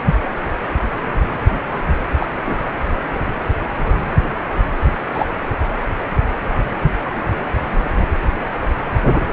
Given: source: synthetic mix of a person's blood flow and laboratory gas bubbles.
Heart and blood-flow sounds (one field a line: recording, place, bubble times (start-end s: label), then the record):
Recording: Doppler ultrasound of blood flow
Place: precordium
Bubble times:
0.05-0.17 s: bubbles
2.19-2.26 s: bubbles
2.45-2.56 s: bubbles
4.82-4.92 s: bubbles
5.13-5.25 s: bubbles
From the record:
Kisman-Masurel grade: 123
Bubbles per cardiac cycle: 1 to 2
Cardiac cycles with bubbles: 10 to 50%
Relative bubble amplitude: loud (0.450 to 0.775)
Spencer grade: 2 (many but less than half of the cardiac periods contain bubble signals, singularly or in groups)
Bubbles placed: anywhere in the cardiac cycle